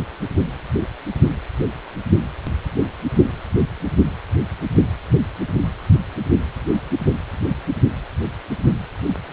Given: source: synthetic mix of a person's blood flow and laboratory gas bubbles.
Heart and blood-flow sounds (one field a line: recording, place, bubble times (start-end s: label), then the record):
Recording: Doppler ultrasound of blood flow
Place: precordium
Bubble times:
no bubbles
From the record:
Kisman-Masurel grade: 000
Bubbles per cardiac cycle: 0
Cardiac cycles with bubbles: 0%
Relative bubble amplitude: no bubbles discernible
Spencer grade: 0 (complete lack of bubble signals)